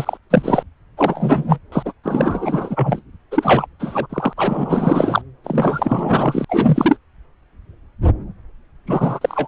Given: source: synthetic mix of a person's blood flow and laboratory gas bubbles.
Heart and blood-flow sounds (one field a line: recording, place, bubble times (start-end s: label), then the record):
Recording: Doppler ultrasound of blood flow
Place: subclavian vein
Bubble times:
0.00-0.17 s: bubbles
0.30-0.63 s: bubbles
0.97-1.59 s: bubbles
1.72-1.93 s: bubbles
2.04-3.02 s: bubbles
3.31-3.66 s: bubbles
3.79-4.07 s: bubbles
4.09-4.33 s: bubbles
4.37-5.21 s: bubbles
5.44-6.45 s: bubbles
6.49-6.97 s: bubbles
8.87-9.48 s: bubbles
From the record:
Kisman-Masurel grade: 333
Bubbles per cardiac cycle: rolling drumbeat, 9 or more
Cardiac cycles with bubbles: 50 to 99%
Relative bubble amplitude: loud (0.450 to 0.775)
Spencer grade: 3 (all of the cardiac periods contain showers or single bubble signals, but not dominating or overriding the cardiac motion signals)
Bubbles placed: anywhere in the cardiac cycle